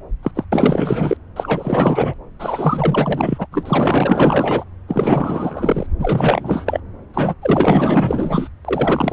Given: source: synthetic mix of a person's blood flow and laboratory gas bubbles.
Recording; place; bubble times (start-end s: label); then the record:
Doppler ultrasound of blood flow; subclavian vein
0.23-0.31 s: bubbles
0.35-0.45 s: bubbles
0.52-1.17 s: bubbles
1.36-2.14 s: bubbles
2.39-3.47 s: bubbles
3.51-4.64 s: bubbles
4.88-5.87 s: bubbles
5.99-6.80 s: bubbles
7.13-7.34 s: bubbles
7.42-8.49 s: bubbles
8.64-9.13 s: bubbles
From the record:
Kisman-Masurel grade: 444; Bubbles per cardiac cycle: continuous sound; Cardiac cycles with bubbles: 100%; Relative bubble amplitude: maximal (0.775 to 0.999); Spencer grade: 4 (maximum detectable bubble signal sounding continuously throughout systole and diastole of every cardiac period, and overriding the amplitude of the normal cardiac signals); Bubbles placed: anywhere in the cardiac cycle